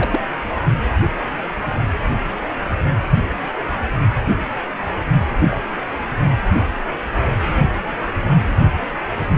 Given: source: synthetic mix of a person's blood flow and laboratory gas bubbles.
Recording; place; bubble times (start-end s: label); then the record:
Doppler ultrasound of blood flow; precordium
0.00-0.20 s: bubbles
5.49-5.57 s: bubbles
From the record:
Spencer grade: 2 (many but less than half of the cardiac periods contain bubble signals, singularly or in groups); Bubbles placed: only in the low amplitude regions of the cardiac cycle